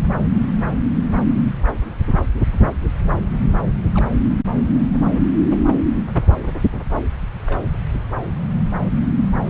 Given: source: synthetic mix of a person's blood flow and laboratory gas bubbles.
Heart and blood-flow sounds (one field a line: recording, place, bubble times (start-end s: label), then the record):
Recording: Doppler ultrasound of blood flow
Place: subclavian vein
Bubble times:
3.42-3.50 s: bubbles
3.94-4.06 s: bubbles
7.46-7.61 s: bubbles
From the record:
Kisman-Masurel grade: 111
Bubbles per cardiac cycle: 1 to 2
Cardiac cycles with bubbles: 1 to 10%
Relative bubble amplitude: barely perceptible (0.100 to 0.250)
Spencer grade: 1 (occasional bubble signal discernible with the cardiac motion signal, with majority of cardiac periods free of bubbles)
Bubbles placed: anywhere in the cardiac cycle